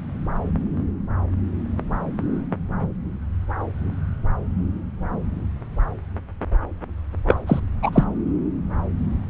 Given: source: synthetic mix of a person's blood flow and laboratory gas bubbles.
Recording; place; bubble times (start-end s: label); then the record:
Doppler ultrasound of blood flow; subclavian vein
7.27-7.36 s: bubbles
7.46-7.60 s: bubbles
7.83-8.03 s: bubbles
From the record:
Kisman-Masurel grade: 213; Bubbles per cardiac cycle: several, 3 to 8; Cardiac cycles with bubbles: 1 to 10%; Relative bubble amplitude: loud (0.450 to 0.775); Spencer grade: 1 (occasional bubble signal discernible with the cardiac motion signal, with majority of cardiac periods free of bubbles); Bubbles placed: anywhere in the cardiac cycle